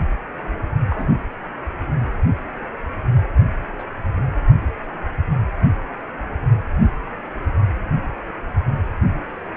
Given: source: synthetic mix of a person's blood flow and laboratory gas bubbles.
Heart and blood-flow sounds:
Doppler ultrasound of blood flow; precordium
0.90-1.13 s: bubbles
3.79-3.84 s: bubbles
From the record:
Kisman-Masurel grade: 122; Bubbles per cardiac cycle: 1 to 2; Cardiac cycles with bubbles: 10 to 50%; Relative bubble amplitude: moderate (0.250 to 0.450); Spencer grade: 2 (many but less than half of the cardiac periods contain bubble signals, singularly or in groups); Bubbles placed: anywhere in the cardiac cycle

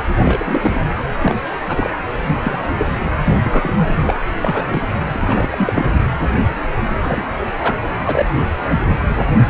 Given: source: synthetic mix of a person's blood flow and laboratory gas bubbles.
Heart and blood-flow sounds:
Doppler ultrasound of blood flow; precordium
0.09-0.15 s: bubbles
0.17-0.85 s: bubbles
1.21-1.35 s: bubbles
1.68-1.89 s: bubbles
2.26-2.37 s: bubbles
2.43-2.60 s: bubbles
2.78-2.96 s: bubbles
3.23-3.74 s: bubbles
3.77-4.16 s: bubbles
4.41-4.88 s: bubbles
5.12-5.86 s: bubbles
7.04-7.26 s: bubbles
7.59-7.77 s: bubbles
8.06-8.25 s: bubbles
9.03-9.18 s: bubbles
From the record:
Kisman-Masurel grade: 242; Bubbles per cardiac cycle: several, 3 to 8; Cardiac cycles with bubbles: 100%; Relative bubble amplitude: moderate (0.250 to 0.450); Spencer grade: 3 (all of the cardiac periods contain showers or single bubble signals, but not dominating or overriding the cardiac motion signals); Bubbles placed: anywhere in the cardiac cycle

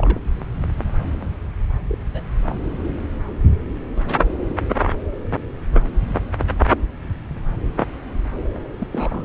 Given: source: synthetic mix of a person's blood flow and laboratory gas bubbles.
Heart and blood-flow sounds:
Doppler ultrasound of blood flow; subclavian vein
0.00-0.20 s: bubbles
1.89-1.95 s: bubbles
2.13-2.22 s: bubbles
2.42-2.58 s: bubbles
8.54-8.60 s: bubbles
8.79-8.87 s: bubbles
8.91-9.25 s: bubbles
From the record:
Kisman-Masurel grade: 221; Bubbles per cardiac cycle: several, 3 to 8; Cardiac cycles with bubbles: 10 to 50%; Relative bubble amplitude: barely perceptible (0.100 to 0.250); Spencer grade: 2 (many but less than half of the cardiac periods contain bubble signals, singularly or in groups); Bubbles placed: anywhere in the cardiac cycle

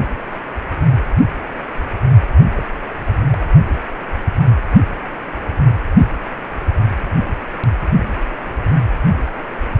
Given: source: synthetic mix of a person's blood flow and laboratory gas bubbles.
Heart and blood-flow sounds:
Doppler ultrasound of blood flow; precordium
2.56-2.65 s: bubbles
3.02-3.14 s: bubbles
3.32-3.37 s: bubbles
From the record:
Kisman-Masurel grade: 211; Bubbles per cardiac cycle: several, 3 to 8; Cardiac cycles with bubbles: 1 to 10%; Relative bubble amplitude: barely perceptible (0.100 to 0.250); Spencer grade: 1 (occasional bubble signal discernible with the cardiac motion signal, with majority of cardiac periods free of bubbles); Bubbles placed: anywhere in the cardiac cycle

